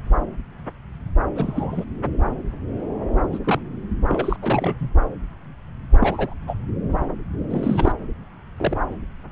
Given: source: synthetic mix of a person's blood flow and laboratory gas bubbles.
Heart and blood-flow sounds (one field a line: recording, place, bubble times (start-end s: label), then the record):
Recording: Doppler ultrasound of blood flow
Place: subclavian vein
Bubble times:
1.35-1.84 s: bubbles
3.32-3.38 s: bubbles
3.44-3.60 s: bubbles
4.08-4.37 s: bubbles
4.42-4.89 s: bubbles
6.00-6.35 s: bubbles
6.47-6.58 s: bubbles
7.50-7.92 s: bubbles
8.57-8.78 s: bubbles
From the record:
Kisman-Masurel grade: 232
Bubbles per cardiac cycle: several, 3 to 8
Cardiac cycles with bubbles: 50 to 99%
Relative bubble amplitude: moderate (0.250 to 0.450)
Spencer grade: 3 (all of the cardiac periods contain showers or single bubble signals, but not dominating or overriding the cardiac motion signals)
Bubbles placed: anywhere in the cardiac cycle